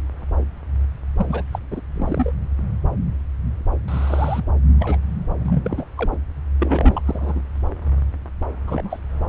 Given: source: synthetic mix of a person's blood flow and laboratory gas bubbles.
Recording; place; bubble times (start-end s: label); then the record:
Doppler ultrasound of blood flow; subclavian vein
1.17-1.44 s: bubbles
1.52-1.59 s: bubbles
1.71-1.81 s: bubbles
1.95-2.32 s: bubbles
3.88-4.43 s: bubbles
4.79-4.98 s: bubbles
5.39-5.85 s: bubbles
5.95-6.17 s: bubbles
6.59-7.01 s: bubbles
7.05-7.43 s: bubbles
8.66-9.00 s: bubbles
From the record:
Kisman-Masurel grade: 232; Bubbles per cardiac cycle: several, 3 to 8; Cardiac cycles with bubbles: 50 to 99%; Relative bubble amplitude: moderate (0.250 to 0.450); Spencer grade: 3 (all of the cardiac periods contain showers or single bubble signals, but not dominating or overriding the cardiac motion signals); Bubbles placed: anywhere in the cardiac cycle